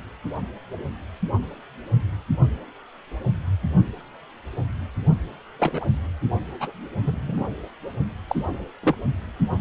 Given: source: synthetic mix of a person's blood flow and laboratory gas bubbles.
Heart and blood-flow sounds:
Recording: Doppler ultrasound of blood flow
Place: precordium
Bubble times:
5.59-5.84 s: bubbles
6.59-6.71 s: bubbles
7.05-7.46 s: bubbles
8.28-8.36 s: bubbles
8.83-8.95 s: bubbles
From the record:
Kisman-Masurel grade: 121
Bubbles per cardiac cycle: 1 to 2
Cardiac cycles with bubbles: 10 to 50%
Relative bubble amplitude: barely perceptible (0.100 to 0.250)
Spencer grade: 2 (many but less than half of the cardiac periods contain bubble signals, singularly or in groups)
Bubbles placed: only in the low amplitude regions of the cardiac cycle

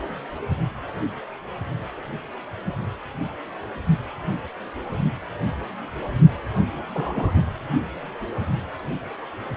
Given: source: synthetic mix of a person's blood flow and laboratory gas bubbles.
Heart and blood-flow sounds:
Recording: Doppler ultrasound of blood flow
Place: precordium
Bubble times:
6.94-7.42 s: bubbles
From the record:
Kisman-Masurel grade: 112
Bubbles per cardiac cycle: 1 to 2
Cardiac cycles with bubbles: 1 to 10%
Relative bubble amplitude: moderate (0.250 to 0.450)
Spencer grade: 1 (occasional bubble signal discernible with the cardiac motion signal, with majority of cardiac periods free of bubbles)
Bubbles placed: only in the low amplitude regions of the cardiac cycle

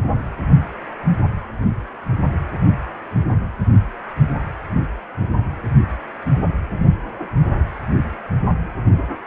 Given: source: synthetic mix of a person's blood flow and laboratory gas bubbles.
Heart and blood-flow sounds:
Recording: Doppler ultrasound of blood flow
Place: precordium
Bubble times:
2.10-2.17 s: bubbles
From the record:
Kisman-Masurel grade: 111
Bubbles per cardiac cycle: 1 to 2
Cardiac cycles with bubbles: 1 to 10%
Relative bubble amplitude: barely perceptible (0.100 to 0.250)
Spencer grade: 1 (occasional bubble signal discernible with the cardiac motion signal, with majority of cardiac periods free of bubbles)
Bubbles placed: only in the low amplitude regions of the cardiac cycle

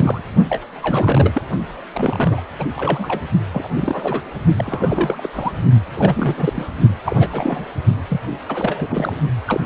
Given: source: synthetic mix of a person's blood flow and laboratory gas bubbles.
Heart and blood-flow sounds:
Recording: Doppler ultrasound of blood flow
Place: precordium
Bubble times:
0.00-0.20 s: bubbles
0.48-0.62 s: bubbles
0.82-1.42 s: bubbles
1.92-2.42 s: bubbles
2.59-2.65 s: bubbles
2.75-3.21 s: bubbles
3.51-3.69 s: bubbles
3.73-4.23 s: bubbles
4.57-5.52 s: bubbles
5.95-6.66 s: bubbles
7.05-7.28 s: bubbles
7.32-7.65 s: bubbles
8.08-8.20 s: bubbles
8.48-9.16 s: bubbles
9.46-9.60 s: bubbles
From the record:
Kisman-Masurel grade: 342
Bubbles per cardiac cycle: rolling drumbeat, 9 or more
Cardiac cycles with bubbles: 100%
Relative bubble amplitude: moderate (0.250 to 0.450)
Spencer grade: 3 (all of the cardiac periods contain showers or single bubble signals, but not dominating or overriding the cardiac motion signals)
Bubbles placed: only in the low amplitude regions of the cardiac cycle

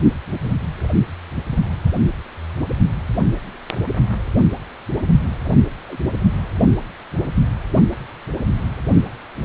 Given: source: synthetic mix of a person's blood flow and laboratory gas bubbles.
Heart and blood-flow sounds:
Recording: Doppler ultrasound of blood flow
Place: precordium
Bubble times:
5.88-5.99 s: bubbles
6.13-6.17 s: bubbles
From the record:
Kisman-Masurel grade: 111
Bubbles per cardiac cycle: 1 to 2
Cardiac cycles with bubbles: 1 to 10%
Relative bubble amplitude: barely perceptible (0.100 to 0.250)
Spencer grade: 1 (occasional bubble signal discernible with the cardiac motion signal, with majority of cardiac periods free of bubbles)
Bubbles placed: anywhere in the cardiac cycle

